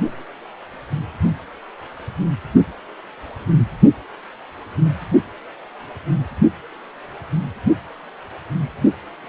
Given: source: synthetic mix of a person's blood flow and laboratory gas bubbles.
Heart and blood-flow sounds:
Doppler ultrasound of blood flow; precordium
no bubbles
From the record:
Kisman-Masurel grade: 000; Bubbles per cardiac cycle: 0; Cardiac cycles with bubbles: 0%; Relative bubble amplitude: no bubbles discernible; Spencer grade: 0 (complete lack of bubble signals)

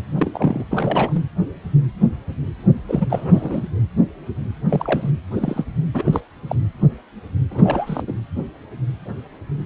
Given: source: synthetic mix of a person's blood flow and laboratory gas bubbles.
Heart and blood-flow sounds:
Doppler ultrasound of blood flow; precordium
0.17-0.65 s: bubbles
0.70-1.21 s: bubbles
2.88-3.06 s: bubbles
3.09-3.63 s: bubbles
4.69-5.11 s: bubbles
5.36-5.65 s: bubbles
5.94-6.20 s: bubbles
6.48-6.56 s: bubbles
7.51-8.01 s: bubbles
8.07-8.13 s: bubbles
From the record:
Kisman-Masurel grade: 232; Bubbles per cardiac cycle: several, 3 to 8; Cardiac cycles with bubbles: 50 to 99%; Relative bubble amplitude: moderate (0.250 to 0.450); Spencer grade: 3 (all of the cardiac periods contain showers or single bubble signals, but not dominating or overriding the cardiac motion signals); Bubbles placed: anywhere in the cardiac cycle

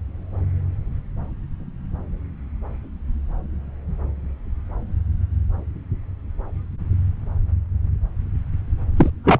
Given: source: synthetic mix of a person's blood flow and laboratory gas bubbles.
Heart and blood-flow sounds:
Doppler ultrasound of blood flow; subclavian vein
8.96-9.10 s: bubbles
9.24-9.40 s: bubbles
From the record:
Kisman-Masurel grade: 113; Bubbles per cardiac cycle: 1 to 2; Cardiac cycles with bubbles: 1 to 10%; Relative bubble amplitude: loud (0.450 to 0.775); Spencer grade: 1 (occasional bubble signal discernible with the cardiac motion signal, with majority of cardiac periods free of bubbles); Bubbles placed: anywhere in the cardiac cycle

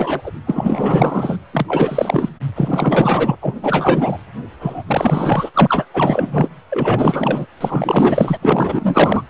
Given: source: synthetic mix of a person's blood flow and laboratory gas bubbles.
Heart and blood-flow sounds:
Doppler ultrasound of blood flow; precordium
0.00-0.21 s: bubbles
0.23-0.31 s: bubbles
0.47-1.38 s: bubbles
1.52-2.29 s: bubbles
2.55-3.36 s: bubbles
3.41-3.54 s: bubbles
3.62-4.17 s: bubbles
4.59-4.83 s: bubbles
4.87-5.50 s: bubbles
5.54-5.85 s: bubbles
5.93-6.50 s: bubbles
6.71-7.46 s: bubbles
7.60-8.38 s: bubbles
8.42-9.22 s: bubbles
From the record:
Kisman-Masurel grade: 444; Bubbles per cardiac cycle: continuous sound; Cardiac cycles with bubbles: 100%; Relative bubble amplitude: maximal (0.775 to 0.999); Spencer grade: 4 (maximum detectable bubble signal sounding continuously throughout systole and diastole of every cardiac period, and overriding the amplitude of the normal cardiac signals); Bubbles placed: anywhere in the cardiac cycle

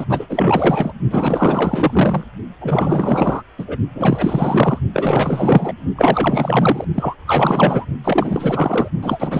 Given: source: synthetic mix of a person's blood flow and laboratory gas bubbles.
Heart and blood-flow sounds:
Doppler ultrasound of blood flow; precordium
0.00-0.05 s: bubbles
0.09-0.93 s: bubbles
1.10-2.24 s: bubbles
2.61-3.42 s: bubbles
3.58-3.65 s: bubbles
3.67-3.77 s: bubbles
3.94-4.79 s: bubbles
4.93-5.73 s: bubbles
5.96-6.85 s: bubbles
6.94-7.15 s: bubbles
7.26-7.85 s: bubbles
8.04-8.88 s: bubbles
9.02-9.39 s: bubbles
From the record:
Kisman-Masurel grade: 444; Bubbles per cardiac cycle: continuous sound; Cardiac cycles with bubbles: 100%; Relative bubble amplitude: maximal (0.775 to 0.999); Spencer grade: 4 (maximum detectable bubble signal sounding continuously throughout systole and diastole of every cardiac period, and overriding the amplitude of the normal cardiac signals); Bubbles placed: only in the low amplitude regions of the cardiac cycle

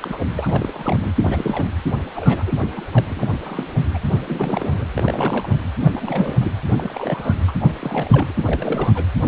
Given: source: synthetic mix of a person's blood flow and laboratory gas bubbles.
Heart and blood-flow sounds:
Doppler ultrasound of blood flow; precordium
0.00-0.20 s: bubbles
0.35-1.12 s: bubbles
1.24-1.71 s: bubbles
2.16-2.44 s: bubbles
2.46-2.52 s: bubbles
2.62-2.69 s: bubbles
2.75-2.87 s: bubbles
2.92-3.05 s: bubbles
3.09-3.27 s: bubbles
3.46-3.71 s: bubbles
3.94-3.99 s: bubbles
4.28-4.84 s: bubbles
4.94-5.57 s: bubbles
5.78-6.37 s: bubbles
6.40-6.52 s: bubbles
6.75-7.34 s: bubbles
7.47-7.52 s: bubbles
7.61-7.73 s: bubbles
7.79-8.32 s: bubbles
8.36-8.92 s: bubbles
8.94-9.05 s: bubbles
9.23-9.28 s: bubbles
From the record:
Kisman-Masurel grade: 342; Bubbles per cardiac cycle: rolling drumbeat, 9 or more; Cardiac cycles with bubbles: 100%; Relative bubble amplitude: moderate (0.250 to 0.450); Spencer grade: 3 (all of the cardiac periods contain showers or single bubble signals, but not dominating or overriding the cardiac motion signals); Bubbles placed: anywhere in the cardiac cycle

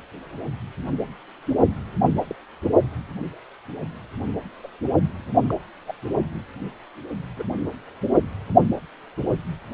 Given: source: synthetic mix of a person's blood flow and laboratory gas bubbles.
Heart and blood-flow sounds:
Doppler ultrasound of blood flow; precordium
2.23-2.35 s: bubbles
4.63-4.68 s: bubbles
5.46-5.54 s: bubbles
5.86-5.94 s: bubbles
7.36-7.43 s: bubbles
From the record:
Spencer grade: 2 (many but less than half of the cardiac periods contain bubble signals, singularly or in groups); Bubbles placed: only in the low amplitude regions of the cardiac cycle

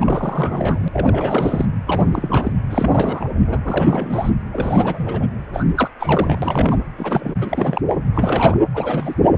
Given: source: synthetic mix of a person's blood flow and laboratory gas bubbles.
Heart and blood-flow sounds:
Doppler ultrasound of blood flow; precordium
0.00-0.88 s: bubbles
0.92-1.66 s: bubbles
1.87-2.53 s: bubbles
2.70-3.29 s: bubbles
3.38-3.59 s: bubbles
3.65-4.30 s: bubbles
4.52-5.26 s: bubbles
5.53-5.64 s: bubbles
5.76-5.89 s: bubbles
5.99-6.82 s: bubbles
6.98-7.33 s: bubbles
7.41-7.81 s: bubbles
8.14-8.57 s: bubbles
8.73-9.14 s: bubbles
9.21-9.37 s: bubbles
From the record:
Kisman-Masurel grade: 342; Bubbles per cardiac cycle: rolling drumbeat, 9 or more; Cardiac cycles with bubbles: 100%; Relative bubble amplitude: moderate (0.250 to 0.450); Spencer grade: 3 (all of the cardiac periods contain showers or single bubble signals, but not dominating or overriding the cardiac motion signals); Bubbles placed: anywhere in the cardiac cycle

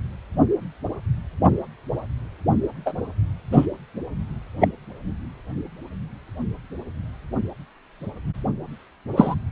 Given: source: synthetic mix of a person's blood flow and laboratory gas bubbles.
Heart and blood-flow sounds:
Doppler ultrasound of blood flow; precordium
2.85-2.94 s: bubbles
3.52-3.65 s: bubbles
4.59-4.68 s: bubbles
9.17-9.35 s: bubbles
From the record:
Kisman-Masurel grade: 123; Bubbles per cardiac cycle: 1 to 2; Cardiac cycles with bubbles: 10 to 50%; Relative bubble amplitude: loud (0.450 to 0.775); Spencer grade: 2 (many but less than half of the cardiac periods contain bubble signals, singularly or in groups); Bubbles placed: anywhere in the cardiac cycle

